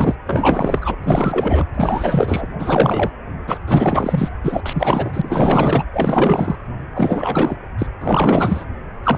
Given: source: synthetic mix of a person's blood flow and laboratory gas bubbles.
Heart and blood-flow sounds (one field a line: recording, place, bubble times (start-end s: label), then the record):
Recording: Doppler ultrasound of blood flow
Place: precordium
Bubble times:
0.00-0.15 s: bubbles
0.26-0.96 s: bubbles
1.04-1.67 s: bubbles
1.74-2.46 s: bubbles
2.59-3.12 s: bubbles
3.47-3.58 s: bubbles
3.67-4.29 s: bubbles
4.43-4.62 s: bubbles
4.66-5.83 s: bubbles
5.93-6.56 s: bubbles
6.95-7.57 s: bubbles
7.78-7.87 s: bubbles
8.00-8.65 s: bubbles
9.03-9.18 s: bubbles
From the record:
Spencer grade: 4 (maximum detectable bubble signal sounding continuously throughout systole and diastole of every cardiac period, and overriding the amplitude of the normal cardiac signals)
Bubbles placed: anywhere in the cardiac cycle